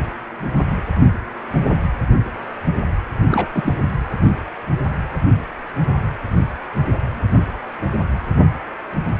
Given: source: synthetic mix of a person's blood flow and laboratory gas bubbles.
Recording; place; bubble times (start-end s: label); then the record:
Doppler ultrasound of blood flow; precordium
3.31-3.46 s: bubbles
3.54-3.74 s: bubbles
From the record:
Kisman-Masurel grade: 223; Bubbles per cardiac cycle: several, 3 to 8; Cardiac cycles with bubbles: 10 to 50%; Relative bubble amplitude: loud (0.450 to 0.775); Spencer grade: 2 (many but less than half of the cardiac periods contain bubble signals, singularly or in groups); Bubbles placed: anywhere in the cardiac cycle